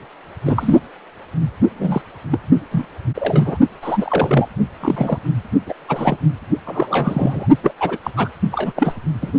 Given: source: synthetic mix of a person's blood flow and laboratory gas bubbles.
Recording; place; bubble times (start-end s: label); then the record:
Doppler ultrasound of blood flow; precordium
0.46-0.80 s: bubbles
1.79-2.02 s: bubbles
2.31-2.38 s: bubbles
2.71-2.85 s: bubbles
3.15-3.58 s: bubbles
3.82-4.49 s: bubbles
4.80-5.21 s: bubbles
5.67-5.73 s: bubbles
5.88-6.18 s: bubbles
6.66-7.46 s: bubbles
7.63-7.72 s: bubbles
7.80-7.98 s: bubbles
8.03-8.10 s: bubbles
8.16-8.28 s: bubbles
8.51-8.72 s: bubbles
8.75-8.93 s: bubbles
9.21-9.31 s: bubbles
From the record:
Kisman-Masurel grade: 243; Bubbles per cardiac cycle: several, 3 to 8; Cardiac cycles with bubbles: 100%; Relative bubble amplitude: loud (0.450 to 0.775); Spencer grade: 3 (all of the cardiac periods contain showers or single bubble signals, but not dominating or overriding the cardiac motion signals); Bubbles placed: only in the low amplitude regions of the cardiac cycle